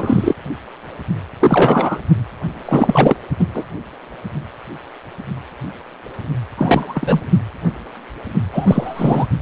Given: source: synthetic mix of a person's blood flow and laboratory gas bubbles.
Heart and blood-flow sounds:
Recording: Doppler ultrasound of blood flow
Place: precordium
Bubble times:
0.00-0.34 s: bubbles
1.40-2.00 s: bubbles
2.65-3.17 s: bubbles
3.39-3.45 s: bubbles
3.54-3.64 s: bubbles
6.57-7.22 s: bubbles
8.54-9.27 s: bubbles
From the record:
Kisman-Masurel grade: 223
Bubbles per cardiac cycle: several, 3 to 8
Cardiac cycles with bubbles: 10 to 50%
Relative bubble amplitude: loud (0.450 to 0.775)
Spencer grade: 2 (many but less than half of the cardiac periods contain bubble signals, singularly or in groups)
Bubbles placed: anywhere in the cardiac cycle

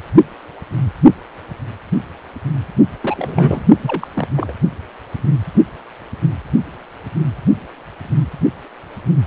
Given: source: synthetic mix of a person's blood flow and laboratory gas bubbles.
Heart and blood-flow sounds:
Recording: Doppler ultrasound of blood flow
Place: precordium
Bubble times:
3.03-3.64 s: bubbles
3.82-4.08 s: bubbles
4.15-4.28 s: bubbles
4.36-4.53 s: bubbles
From the record:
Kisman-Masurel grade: 222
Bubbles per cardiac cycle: several, 3 to 8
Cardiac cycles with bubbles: 10 to 50%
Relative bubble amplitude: moderate (0.250 to 0.450)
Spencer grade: 2 (many but less than half of the cardiac periods contain bubble signals, singularly or in groups)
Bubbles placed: only in the low amplitude regions of the cardiac cycle

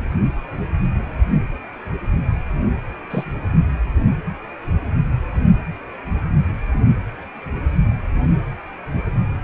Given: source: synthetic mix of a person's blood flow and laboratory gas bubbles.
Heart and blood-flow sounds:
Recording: Doppler ultrasound of blood flow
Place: precordium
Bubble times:
3.10-3.58 s: bubbles
From the record:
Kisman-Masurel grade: 121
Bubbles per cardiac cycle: 1 to 2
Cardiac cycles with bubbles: 10 to 50%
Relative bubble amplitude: barely perceptible (0.100 to 0.250)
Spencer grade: 2 (many but less than half of the cardiac periods contain bubble signals, singularly or in groups)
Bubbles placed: anywhere in the cardiac cycle

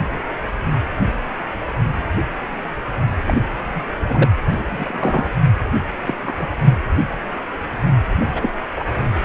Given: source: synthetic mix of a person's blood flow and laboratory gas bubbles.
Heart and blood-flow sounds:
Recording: Doppler ultrasound of blood flow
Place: precordium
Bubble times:
3.25-3.47 s: bubbles
3.58-3.83 s: bubbles
4.00-4.32 s: bubbles
4.53-5.31 s: bubbles
6.04-6.15 s: bubbles
6.22-6.48 s: bubbles
6.61-6.74 s: bubbles
8.20-8.53 s: bubbles
8.71-8.83 s: bubbles
From the record:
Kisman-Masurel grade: 232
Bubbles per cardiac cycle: several, 3 to 8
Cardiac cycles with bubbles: 50 to 99%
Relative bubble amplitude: moderate (0.250 to 0.450)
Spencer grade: 3 (all of the cardiac periods contain showers or single bubble signals, but not dominating or overriding the cardiac motion signals)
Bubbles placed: anywhere in the cardiac cycle

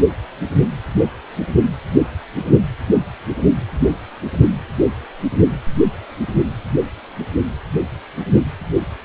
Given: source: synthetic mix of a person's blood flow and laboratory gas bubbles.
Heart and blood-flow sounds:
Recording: Doppler ultrasound of blood flow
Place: precordium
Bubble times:
0.61-0.67 s: bubbles
From the record:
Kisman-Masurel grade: 113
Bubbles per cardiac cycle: 1 to 2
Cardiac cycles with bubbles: 1 to 10%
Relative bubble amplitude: loud (0.450 to 0.775)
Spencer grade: 1 (occasional bubble signal discernible with the cardiac motion signal, with majority of cardiac periods free of bubbles)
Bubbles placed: anywhere in the cardiac cycle

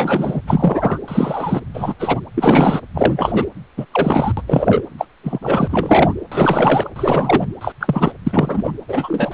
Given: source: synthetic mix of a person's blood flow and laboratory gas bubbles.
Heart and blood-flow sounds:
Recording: Doppler ultrasound of blood flow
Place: precordium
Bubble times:
0.00-0.41 s: bubbles
0.47-0.99 s: bubbles
1.07-1.61 s: bubbles
1.74-1.94 s: bubbles
1.99-2.20 s: bubbles
2.34-2.80 s: bubbles
2.94-3.45 s: bubbles
3.77-3.85 s: bubbles
3.91-4.33 s: bubbles
4.37-4.42 s: bubbles
4.47-4.82 s: bubbles
4.98-5.07 s: bubbles
5.23-5.39 s: bubbles
5.42-6.14 s: bubbles
6.32-6.89 s: bubbles
6.96-7.48 s: bubbles
7.61-7.73 s: bubbles
7.80-8.12 s: bubbles
8.26-8.72 s: bubbles
8.88-9.34 s: bubbles
From the record:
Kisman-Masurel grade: 243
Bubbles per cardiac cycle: several, 3 to 8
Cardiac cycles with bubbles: 100%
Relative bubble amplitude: loud (0.450 to 0.775)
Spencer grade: 3 (all of the cardiac periods contain showers or single bubble signals, but not dominating or overriding the cardiac motion signals)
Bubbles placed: anywhere in the cardiac cycle

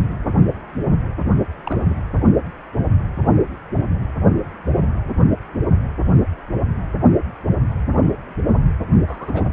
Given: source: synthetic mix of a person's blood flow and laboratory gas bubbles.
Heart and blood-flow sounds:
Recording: Doppler ultrasound of blood flow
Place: precordium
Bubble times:
1.65-1.94 s: bubbles
9.08-9.45 s: bubbles
From the record:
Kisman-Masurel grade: 121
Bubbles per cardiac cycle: 1 to 2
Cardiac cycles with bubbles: 10 to 50%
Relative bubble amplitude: barely perceptible (0.100 to 0.250)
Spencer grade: 2 (many but less than half of the cardiac periods contain bubble signals, singularly or in groups)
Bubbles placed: anywhere in the cardiac cycle

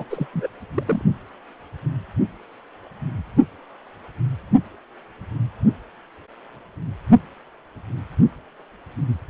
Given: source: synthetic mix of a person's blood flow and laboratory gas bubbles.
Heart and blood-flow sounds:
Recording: Doppler ultrasound of blood flow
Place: precordium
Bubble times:
0.00-0.04 s: bubbles
0.10-0.27 s: bubbles
0.34-0.48 s: bubbles
0.75-1.01 s: bubbles
From the record:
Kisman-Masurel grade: 211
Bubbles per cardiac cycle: several, 3 to 8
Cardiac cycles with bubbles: 1 to 10%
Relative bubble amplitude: barely perceptible (0.100 to 0.250)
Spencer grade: 1 (occasional bubble signal discernible with the cardiac motion signal, with majority of cardiac periods free of bubbles)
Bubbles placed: only in the low amplitude regions of the cardiac cycle

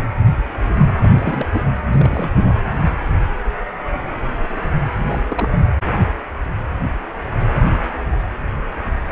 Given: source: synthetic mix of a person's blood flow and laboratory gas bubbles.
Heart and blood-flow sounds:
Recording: Doppler ultrasound of blood flow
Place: precordium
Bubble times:
0.00-0.07 s: bubbles
1.01-1.46 s: bubbles
1.52-1.62 s: bubbles
1.92-2.38 s: bubbles
2.42-2.60 s: bubbles
5.06-5.21 s: bubbles
5.28-5.49 s: bubbles
5.51-5.62 s: bubbles
From the record:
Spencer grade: 2 (many but less than half of the cardiac periods contain bubble signals, singularly or in groups)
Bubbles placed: anywhere in the cardiac cycle

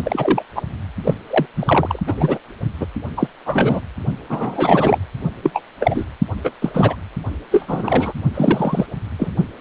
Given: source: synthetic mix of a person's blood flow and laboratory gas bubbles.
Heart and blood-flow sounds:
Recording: Doppler ultrasound of blood flow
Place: precordium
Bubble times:
0.03-0.43 s: bubbles
0.55-0.62 s: bubbles
1.04-1.14 s: bubbles
1.30-1.46 s: bubbles
1.56-1.99 s: bubbles
2.07-2.39 s: bubbles
2.79-2.86 s: bubbles
3.17-3.27 s: bubbles
3.45-3.80 s: bubbles
4.29-4.98 s: bubbles
5.42-5.62 s: bubbles
5.80-6.05 s: bubbles
6.43-6.51 s: bubbles
6.62-6.70 s: bubbles
6.74-6.96 s: bubbles
7.51-8.12 s: bubbles
8.34-8.86 s: bubbles
9.18-9.32 s: bubbles
From the record:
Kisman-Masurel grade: 243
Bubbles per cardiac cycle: several, 3 to 8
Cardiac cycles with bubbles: 100%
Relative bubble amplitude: loud (0.450 to 0.775)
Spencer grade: 3 (all of the cardiac periods contain showers or single bubble signals, but not dominating or overriding the cardiac motion signals)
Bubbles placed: only in the low amplitude regions of the cardiac cycle

